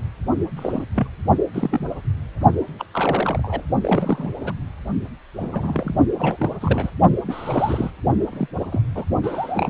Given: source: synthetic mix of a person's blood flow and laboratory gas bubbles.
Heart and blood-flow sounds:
Doppler ultrasound of blood flow; precordium
0.56-0.85 s: bubbles
0.94-1.08 s: bubbles
1.54-1.88 s: bubbles
2.79-2.85 s: bubbles
2.93-3.62 s: bubbles
3.81-4.29 s: bubbles
4.42-4.52 s: bubbles
5.37-5.96 s: bubbles
6.18-6.55 s: bubbles
6.61-6.91 s: bubbles
7.24-7.91 s: bubbles
8.31-8.47 s: bubbles
8.60-8.64 s: bubbles
8.71-8.82 s: bubbles
8.95-9.04 s: bubbles
9.23-9.70 s: bubbles
From the record:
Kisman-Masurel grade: 242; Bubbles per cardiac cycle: several, 3 to 8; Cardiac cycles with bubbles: 100%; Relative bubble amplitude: moderate (0.250 to 0.450); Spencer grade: 3 (all of the cardiac periods contain showers or single bubble signals, but not dominating or overriding the cardiac motion signals); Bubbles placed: only in the low amplitude regions of the cardiac cycle

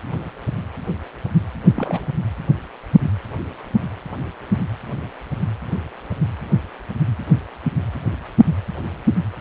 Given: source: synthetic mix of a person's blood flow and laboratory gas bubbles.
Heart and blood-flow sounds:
Doppler ultrasound of blood flow; precordium
1.61-2.06 s: bubbles
From the record:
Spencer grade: 1 (occasional bubble signal discernible with the cardiac motion signal, with majority of cardiac periods free of bubbles); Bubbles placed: anywhere in the cardiac cycle

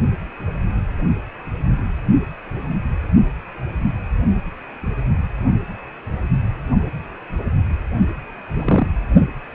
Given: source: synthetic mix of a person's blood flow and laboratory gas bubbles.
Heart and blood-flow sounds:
Doppler ultrasound of blood flow; precordium
8.54-8.87 s: bubbles
From the record:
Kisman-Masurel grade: 112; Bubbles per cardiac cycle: 1 to 2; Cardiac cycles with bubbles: 1 to 10%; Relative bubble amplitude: moderate (0.250 to 0.450); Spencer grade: 1 (occasional bubble signal discernible with the cardiac motion signal, with majority of cardiac periods free of bubbles); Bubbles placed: only in the low amplitude regions of the cardiac cycle

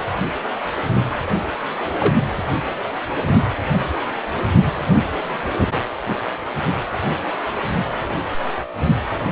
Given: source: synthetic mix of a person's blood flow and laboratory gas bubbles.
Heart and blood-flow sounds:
Doppler ultrasound of blood flow; precordium
1.98-2.15 s: bubbles
From the record:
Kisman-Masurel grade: 122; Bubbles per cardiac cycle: 1 to 2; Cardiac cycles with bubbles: 10 to 50%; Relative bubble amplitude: moderate (0.250 to 0.450); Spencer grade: 2 (many but less than half of the cardiac periods contain bubble signals, singularly or in groups); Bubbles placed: anywhere in the cardiac cycle

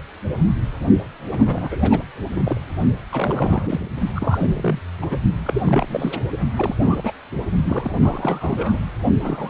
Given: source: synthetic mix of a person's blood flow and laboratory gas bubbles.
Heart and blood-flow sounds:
Doppler ultrasound of blood flow; precordium
1.31-2.02 s: bubbles
2.35-2.61 s: bubbles
3.12-3.94 s: bubbles
4.15-4.79 s: bubbles
5.01-5.06 s: bubbles
5.10-5.17 s: bubbles
5.43-6.21 s: bubbles
6.57-6.75 s: bubbles
6.79-7.11 s: bubbles
7.65-7.91 s: bubbles
8.00-8.79 s: bubbles
9.21-9.50 s: bubbles
From the record:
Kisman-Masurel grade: 332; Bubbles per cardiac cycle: rolling drumbeat, 9 or more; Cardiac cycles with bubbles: 50 to 99%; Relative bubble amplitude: moderate (0.250 to 0.450); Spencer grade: 3 (all of the cardiac periods contain showers or single bubble signals, but not dominating or overriding the cardiac motion signals); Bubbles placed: only in the low amplitude regions of the cardiac cycle

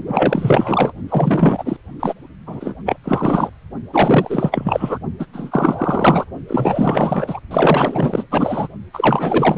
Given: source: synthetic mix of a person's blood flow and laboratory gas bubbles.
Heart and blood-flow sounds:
Doppler ultrasound of blood flow; precordium
0.06-0.92 s: bubbles
1.08-1.77 s: bubbles
2.00-2.13 s: bubbles
2.46-2.75 s: bubbles
2.85-2.96 s: bubbles
3.04-3.50 s: bubbles
3.93-4.99 s: bubbles
5.20-5.26 s: bubbles
5.33-6.25 s: bubbles
6.48-7.40 s: bubbles
7.51-8.24 s: bubbles
8.30-8.68 s: bubbles
8.93-9.58 s: bubbles
From the record:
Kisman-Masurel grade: 444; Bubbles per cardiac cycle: continuous sound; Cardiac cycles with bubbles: 100%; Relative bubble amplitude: maximal (0.775 to 0.999); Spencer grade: 4 (maximum detectable bubble signal sounding continuously throughout systole and diastole of every cardiac period, and overriding the amplitude of the normal cardiac signals); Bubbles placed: only in the low amplitude regions of the cardiac cycle

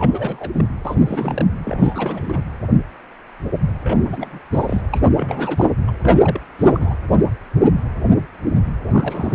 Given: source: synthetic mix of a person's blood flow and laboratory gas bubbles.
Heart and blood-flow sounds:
Doppler ultrasound of blood flow; precordium
0.00-0.49 s: bubbles
0.54-0.68 s: bubbles
0.85-1.46 s: bubbles
1.64-2.41 s: bubbles
3.83-4.40 s: bubbles
4.52-4.82 s: bubbles
4.91-5.00 s: bubbles
5.17-5.71 s: bubbles
5.87-5.91 s: bubbles
6.03-6.41 s: bubbles
6.59-6.95 s: bubbles
8.90-9.34 s: bubbles
From the record:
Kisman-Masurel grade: 332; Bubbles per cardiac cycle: rolling drumbeat, 9 or more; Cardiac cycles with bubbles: 50 to 99%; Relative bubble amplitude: moderate (0.250 to 0.450); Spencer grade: 3 (all of the cardiac periods contain showers or single bubble signals, but not dominating or overriding the cardiac motion signals); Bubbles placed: anywhere in the cardiac cycle

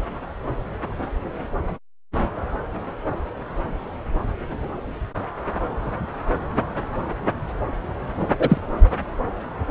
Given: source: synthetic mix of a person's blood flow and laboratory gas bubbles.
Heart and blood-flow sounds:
Doppler ultrasound of blood flow; subclavian vein
8.38-8.58 s: bubbles
From the record:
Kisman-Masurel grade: 113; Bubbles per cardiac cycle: 1 to 2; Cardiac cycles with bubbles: 1 to 10%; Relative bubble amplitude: loud (0.450 to 0.775); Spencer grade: 1 (occasional bubble signal discernible with the cardiac motion signal, with majority of cardiac periods free of bubbles); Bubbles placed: anywhere in the cardiac cycle

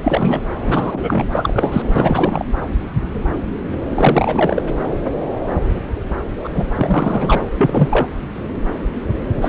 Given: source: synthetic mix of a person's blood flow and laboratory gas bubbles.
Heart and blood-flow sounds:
Doppler ultrasound of blood flow; subclavian vein
0.03-0.41 s: bubbles
0.66-1.25 s: bubbles
1.31-1.82 s: bubbles
1.96-2.45 s: bubbles
3.94-4.64 s: bubbles
6.44-6.49 s: bubbles
6.53-6.67 s: bubbles
6.75-7.42 s: bubbles
7.53-7.56 s: bubbles
7.58-8.05 s: bubbles
9.41-9.49 s: bubbles
From the record:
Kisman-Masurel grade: 333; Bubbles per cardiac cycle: rolling drumbeat, 9 or more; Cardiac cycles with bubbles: 50 to 99%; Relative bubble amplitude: loud (0.450 to 0.775); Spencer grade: 3 (all of the cardiac periods contain showers or single bubble signals, but not dominating or overriding the cardiac motion signals); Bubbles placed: anywhere in the cardiac cycle

